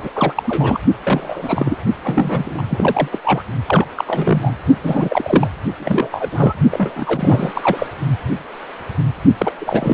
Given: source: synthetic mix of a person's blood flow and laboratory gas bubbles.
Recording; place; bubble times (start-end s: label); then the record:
Doppler ultrasound of blood flow; precordium
0.00-0.11 s: bubbles
0.15-0.43 s: bubbles
0.47-0.80 s: bubbles
1.03-1.77 s: bubbles
2.03-2.62 s: bubbles
2.70-3.09 s: bubbles
3.12-3.20 s: bubbles
3.24-3.42 s: bubbles
3.67-3.86 s: bubbles
3.95-4.53 s: bubbles
4.83-5.48 s: bubbles
5.76-6.10 s: bubbles
6.12-6.53 s: bubbles
6.71-7.88 s: bubbles
9.38-9.54 s: bubbles
9.59-9.94 s: bubbles
From the record:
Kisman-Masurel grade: 332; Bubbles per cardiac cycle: rolling drumbeat, 9 or more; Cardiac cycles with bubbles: 50 to 99%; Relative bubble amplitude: moderate (0.250 to 0.450); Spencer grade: 3 (all of the cardiac periods contain showers or single bubble signals, but not dominating or overriding the cardiac motion signals); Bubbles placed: only in the low amplitude regions of the cardiac cycle